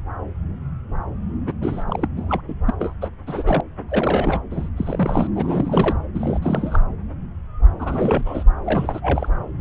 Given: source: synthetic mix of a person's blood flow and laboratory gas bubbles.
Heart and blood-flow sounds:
Doppler ultrasound of blood flow; subclavian vein
1.47-1.53 s: bubbles
1.60-1.84 s: bubbles
1.87-2.06 s: bubbles
2.17-2.41 s: bubbles
2.48-2.54 s: bubbles
2.65-2.75 s: bubbles
2.79-2.93 s: bubbles
3.01-3.08 s: bubbles
3.27-3.60 s: bubbles
3.79-3.84 s: bubbles
3.89-4.39 s: bubbles
4.50-4.69 s: bubbles
4.76-5.27 s: bubbles
5.35-5.96 s: bubbles
6.14-6.39 s: bubbles
6.42-6.79 s: bubbles
7.79-8.44 s: bubbles
8.64-9.29 s: bubbles
From the record:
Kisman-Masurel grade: 332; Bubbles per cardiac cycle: rolling drumbeat, 9 or more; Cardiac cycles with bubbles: 50 to 99%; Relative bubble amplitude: moderate (0.250 to 0.450); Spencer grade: 3 (all of the cardiac periods contain showers or single bubble signals, but not dominating or overriding the cardiac motion signals); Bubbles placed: anywhere in the cardiac cycle

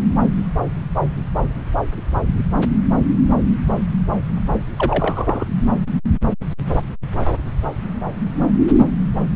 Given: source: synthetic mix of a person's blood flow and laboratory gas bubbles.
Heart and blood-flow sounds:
Doppler ultrasound of blood flow; subclavian vein
4.76-5.45 s: bubbles
From the record:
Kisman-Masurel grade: 122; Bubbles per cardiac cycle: 1 to 2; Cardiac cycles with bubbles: 10 to 50%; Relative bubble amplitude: moderate (0.250 to 0.450); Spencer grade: 2 (many but less than half of the cardiac periods contain bubble signals, singularly or in groups); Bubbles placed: anywhere in the cardiac cycle

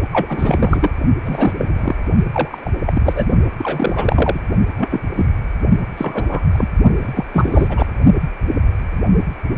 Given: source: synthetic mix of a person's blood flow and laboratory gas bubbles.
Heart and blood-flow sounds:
Doppler ultrasound of blood flow; precordium
0.12-0.89 s: bubbles
1.24-1.53 s: bubbles
1.57-1.96 s: bubbles
2.33-2.70 s: bubbles
2.85-3.26 s: bubbles
3.58-4.39 s: bubbles
4.78-5.00 s: bubbles
5.16-5.26 s: bubbles
5.97-6.45 s: bubbles
6.53-6.68 s: bubbles
6.98-7.25 s: bubbles
7.33-7.86 s: bubbles
From the record:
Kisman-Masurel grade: 233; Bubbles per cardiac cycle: several, 3 to 8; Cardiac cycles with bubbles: 50 to 99%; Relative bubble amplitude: loud (0.450 to 0.775); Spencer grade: 3 (all of the cardiac periods contain showers or single bubble signals, but not dominating or overriding the cardiac motion signals); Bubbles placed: only in the low amplitude regions of the cardiac cycle

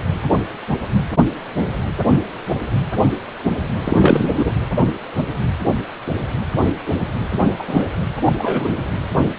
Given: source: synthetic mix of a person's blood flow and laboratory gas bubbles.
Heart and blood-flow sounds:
Doppler ultrasound of blood flow; precordium
3.84-4.32 s: bubbles
4.35-4.52 s: bubbles
7.38-7.89 s: bubbles
8.25-8.33 s: bubbles
8.38-8.69 s: bubbles
From the record:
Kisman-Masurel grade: 223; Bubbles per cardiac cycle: several, 3 to 8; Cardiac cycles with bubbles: 10 to 50%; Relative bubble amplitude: loud (0.450 to 0.775); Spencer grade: 2 (many but less than half of the cardiac periods contain bubble signals, singularly or in groups); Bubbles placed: anywhere in the cardiac cycle

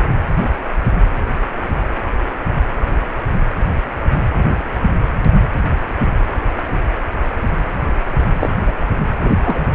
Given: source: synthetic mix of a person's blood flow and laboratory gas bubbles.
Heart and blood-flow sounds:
Doppler ultrasound of blood flow; precordium
8.39-8.51 s: bubbles
8.66-8.74 s: bubbles
9.20-9.34 s: bubbles
9.45-9.66 s: bubbles
From the record:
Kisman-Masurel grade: 123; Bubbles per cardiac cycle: 1 to 2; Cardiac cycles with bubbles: 10 to 50%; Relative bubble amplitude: loud (0.450 to 0.775); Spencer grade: 2 (many but less than half of the cardiac periods contain bubble signals, singularly or in groups); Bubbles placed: anywhere in the cardiac cycle

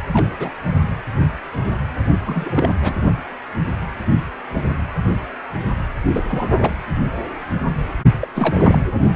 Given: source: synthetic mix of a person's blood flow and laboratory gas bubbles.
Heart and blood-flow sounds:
Doppler ultrasound of blood flow; precordium
0.12-0.28 s: bubbles
0.39-0.49 s: bubbles
2.26-2.72 s: bubbles
2.82-2.93 s: bubbles
6.12-6.22 s: bubbles
6.28-6.80 s: bubbles
8.20-8.28 s: bubbles
8.35-8.82 s: bubbles
From the record:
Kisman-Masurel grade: 222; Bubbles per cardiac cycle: several, 3 to 8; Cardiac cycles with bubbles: 10 to 50%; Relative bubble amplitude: moderate (0.250 to 0.450); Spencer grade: 2 (many but less than half of the cardiac periods contain bubble signals, singularly or in groups); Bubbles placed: only in the low amplitude regions of the cardiac cycle

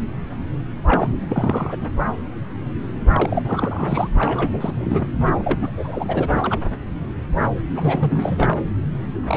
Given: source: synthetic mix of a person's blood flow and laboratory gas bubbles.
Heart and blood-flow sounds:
Doppler ultrasound of blood flow; subclavian vein
0.87-1.07 s: bubbles
1.29-1.77 s: bubbles
3.12-4.09 s: bubbles
4.18-5.14 s: bubbles
5.39-5.57 s: bubbles
5.61-6.29 s: bubbles
6.31-6.58 s: bubbles
7.74-8.65 s: bubbles
9.19-9.37 s: bubbles
From the record:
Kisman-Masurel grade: 332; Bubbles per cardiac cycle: rolling drumbeat, 9 or more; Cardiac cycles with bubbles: 50 to 99%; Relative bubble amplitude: moderate (0.250 to 0.450); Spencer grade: 3 (all of the cardiac periods contain showers or single bubble signals, but not dominating or overriding the cardiac motion signals); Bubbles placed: anywhere in the cardiac cycle

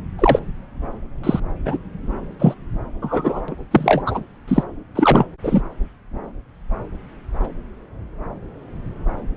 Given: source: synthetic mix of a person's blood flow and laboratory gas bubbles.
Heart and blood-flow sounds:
Doppler ultrasound of blood flow; subclavian vein
0.18-0.39 s: bubbles
1.23-1.40 s: bubbles
1.65-1.77 s: bubbles
2.39-2.54 s: bubbles
3.01-3.42 s: bubbles
3.48-3.54 s: bubbles
3.71-4.03 s: bubbles
4.06-4.21 s: bubbles
4.48-4.64 s: bubbles
4.95-5.27 s: bubbles
5.43-5.62 s: bubbles
From the record:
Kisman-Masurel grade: 233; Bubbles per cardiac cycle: several, 3 to 8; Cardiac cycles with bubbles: 50 to 99%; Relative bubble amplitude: loud (0.450 to 0.775); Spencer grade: 3 (all of the cardiac periods contain showers or single bubble signals, but not dominating or overriding the cardiac motion signals); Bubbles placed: anywhere in the cardiac cycle

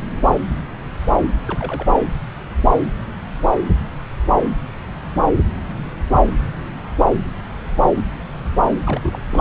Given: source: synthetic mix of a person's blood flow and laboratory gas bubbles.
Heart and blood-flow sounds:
Doppler ultrasound of blood flow; subclavian vein
1.24-1.29 s: bubbles
1.45-2.00 s: bubbles
8.86-9.27 s: bubbles
9.31-9.41 s: bubbles
From the record:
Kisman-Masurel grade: 221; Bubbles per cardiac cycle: several, 3 to 8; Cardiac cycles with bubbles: 10 to 50%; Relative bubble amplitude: barely perceptible (0.100 to 0.250); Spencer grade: 2 (many but less than half of the cardiac periods contain bubble signals, singularly or in groups); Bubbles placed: anywhere in the cardiac cycle

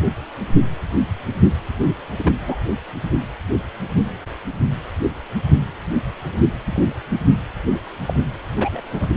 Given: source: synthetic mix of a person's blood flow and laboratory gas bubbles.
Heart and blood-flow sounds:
Doppler ultrasound of blood flow; precordium
2.18-2.33 s: bubbles
2.46-2.57 s: bubbles
6.65-6.87 s: bubbles
8.05-8.13 s: bubbles
8.57-8.81 s: bubbles
8.93-9.06 s: bubbles
From the record:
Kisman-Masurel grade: 122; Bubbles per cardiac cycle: 1 to 2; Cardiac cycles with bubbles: 10 to 50%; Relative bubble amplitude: moderate (0.250 to 0.450); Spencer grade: 2 (many but less than half of the cardiac periods contain bubble signals, singularly or in groups); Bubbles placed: anywhere in the cardiac cycle

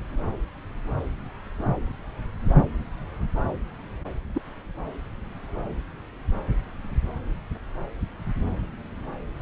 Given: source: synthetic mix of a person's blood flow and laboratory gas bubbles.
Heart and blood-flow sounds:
Doppler ultrasound of blood flow; subclavian vein
4.35-4.41 s: bubbles
From the record:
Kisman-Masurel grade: 111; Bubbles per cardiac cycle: 1 to 2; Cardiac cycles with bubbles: 1 to 10%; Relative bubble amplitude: barely perceptible (0.100 to 0.250); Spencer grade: 1 (occasional bubble signal discernible with the cardiac motion signal, with majority of cardiac periods free of bubbles); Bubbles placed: anywhere in the cardiac cycle

